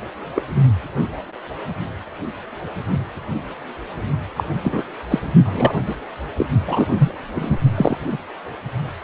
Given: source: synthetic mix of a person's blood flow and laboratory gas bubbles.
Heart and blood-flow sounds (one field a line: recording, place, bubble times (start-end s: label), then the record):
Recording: Doppler ultrasound of blood flow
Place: precordium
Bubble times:
0.35-0.43 s: bubbles
4.36-4.44 s: bubbles
4.64-4.82 s: bubbles
5.10-5.20 s: bubbles
5.45-5.76 s: bubbles
5.86-5.96 s: bubbles
6.37-6.46 s: bubbles
6.66-6.88 s: bubbles
6.90-7.12 s: bubbles
7.30-7.59 s: bubbles
7.75-7.97 s: bubbles
8.06-8.17 s: bubbles
From the record:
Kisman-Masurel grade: 233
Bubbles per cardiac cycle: several, 3 to 8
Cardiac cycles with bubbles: 50 to 99%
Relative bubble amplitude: loud (0.450 to 0.775)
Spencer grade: 3 (all of the cardiac periods contain showers or single bubble signals, but not dominating or overriding the cardiac motion signals)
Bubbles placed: only in the low amplitude regions of the cardiac cycle